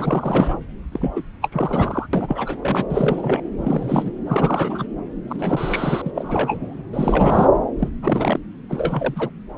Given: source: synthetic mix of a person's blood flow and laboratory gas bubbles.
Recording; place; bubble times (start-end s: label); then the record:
Doppler ultrasound of blood flow; subclavian vein
0.00-0.59 s: bubbles
0.91-1.13 s: bubbles
1.16-1.22 s: bubbles
1.42-1.49 s: bubbles
1.52-2.07 s: bubbles
2.13-2.85 s: bubbles
2.90-3.43 s: bubbles
3.58-4.11 s: bubbles
4.26-4.86 s: bubbles
5.29-6.02 s: bubbles
6.05-6.10 s: bubbles
6.15-6.82 s: bubbles
6.93-7.49 s: bubbles
7.79-7.89 s: bubbles
8.02-8.40 s: bubbles
8.69-9.30 s: bubbles
From the record:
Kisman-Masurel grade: 342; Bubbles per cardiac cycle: rolling drumbeat, 9 or more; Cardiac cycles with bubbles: 100%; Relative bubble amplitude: moderate (0.250 to 0.450); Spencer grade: 3 (all of the cardiac periods contain showers or single bubble signals, but not dominating or overriding the cardiac motion signals); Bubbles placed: anywhere in the cardiac cycle